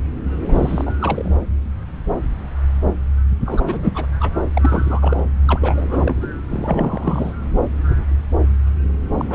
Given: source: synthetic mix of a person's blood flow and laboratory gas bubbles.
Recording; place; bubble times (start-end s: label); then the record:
Doppler ultrasound of blood flow; subclavian vein
0.48-0.92 s: bubbles
1.01-1.34 s: bubbles
3.45-4.07 s: bubbles
4.20-4.36 s: bubbles
4.54-5.25 s: bubbles
5.47-6.16 s: bubbles
6.21-6.27 s: bubbles
6.50-7.33 s: bubbles
9.18-9.25 s: bubbles
9.29-9.35 s: bubbles
From the record:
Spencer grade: 3 (all of the cardiac periods contain showers or single bubble signals, but not dominating or overriding the cardiac motion signals); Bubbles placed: anywhere in the cardiac cycle